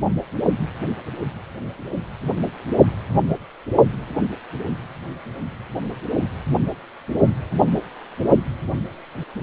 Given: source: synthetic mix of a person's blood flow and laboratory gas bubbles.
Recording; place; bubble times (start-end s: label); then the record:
Doppler ultrasound of blood flow; precordium
no bubbles
From the record:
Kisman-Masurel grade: 000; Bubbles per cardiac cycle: 0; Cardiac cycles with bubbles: 0%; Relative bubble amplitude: no bubbles discernible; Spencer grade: 0 (complete lack of bubble signals)